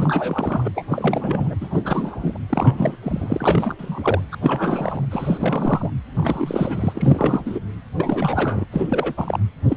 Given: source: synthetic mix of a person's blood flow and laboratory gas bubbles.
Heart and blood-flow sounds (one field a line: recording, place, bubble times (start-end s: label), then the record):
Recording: Doppler ultrasound of blood flow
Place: precordium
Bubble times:
0.00-0.70 s: bubbles
0.75-0.85 s: bubbles
0.89-1.54 s: bubbles
1.60-1.81 s: bubbles
1.84-2.38 s: bubbles
2.49-2.96 s: bubbles
3.03-3.75 s: bubbles
3.79-4.22 s: bubbles
4.32-4.36 s: bubbles
4.42-5.07 s: bubbles
5.11-5.90 s: bubbles
6.16-7.59 s: bubbles
7.98-8.65 s: bubbles
8.71-9.13 s: bubbles
9.17-9.38 s: bubbles
9.69-9.77 s: bubbles
From the record:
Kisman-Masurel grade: 342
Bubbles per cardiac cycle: rolling drumbeat, 9 or more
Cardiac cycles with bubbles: 100%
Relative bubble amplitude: moderate (0.250 to 0.450)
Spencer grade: 3 (all of the cardiac periods contain showers or single bubble signals, but not dominating or overriding the cardiac motion signals)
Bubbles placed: anywhere in the cardiac cycle